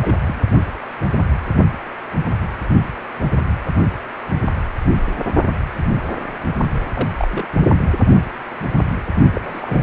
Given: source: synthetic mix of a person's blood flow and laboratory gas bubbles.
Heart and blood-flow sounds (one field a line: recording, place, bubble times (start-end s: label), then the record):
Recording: Doppler ultrasound of blood flow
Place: precordium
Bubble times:
0.01-0.16 s: bubbles
0.26-0.34 s: bubbles
6.74-6.87 s: bubbles
6.95-7.10 s: bubbles
7.17-7.28 s: bubbles
7.31-7.46 s: bubbles
9.33-9.83 s: bubbles
From the record:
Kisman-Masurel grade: 221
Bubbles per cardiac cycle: several, 3 to 8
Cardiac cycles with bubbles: 10 to 50%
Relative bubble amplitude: barely perceptible (0.100 to 0.250)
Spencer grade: 2 (many but less than half of the cardiac periods contain bubble signals, singularly or in groups)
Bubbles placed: only in the low amplitude regions of the cardiac cycle